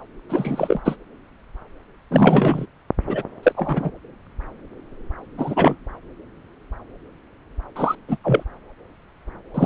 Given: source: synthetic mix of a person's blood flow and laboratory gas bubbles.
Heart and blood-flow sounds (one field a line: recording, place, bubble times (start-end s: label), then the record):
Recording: Doppler ultrasound of blood flow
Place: subclavian vein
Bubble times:
0.29-0.82 s: bubbles
0.84-0.96 s: bubbles
2.10-2.66 s: bubbles
3.06-3.22 s: bubbles
3.43-3.52 s: bubbles
3.56-3.90 s: bubbles
5.38-5.75 s: bubbles
7.75-7.95 s: bubbles
8.07-8.17 s: bubbles
8.24-8.43 s: bubbles
9.54-9.66 s: bubbles
From the record:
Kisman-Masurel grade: 223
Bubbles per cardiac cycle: several, 3 to 8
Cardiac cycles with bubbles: 10 to 50%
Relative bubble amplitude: loud (0.450 to 0.775)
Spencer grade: 2 (many but less than half of the cardiac periods contain bubble signals, singularly or in groups)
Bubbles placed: anywhere in the cardiac cycle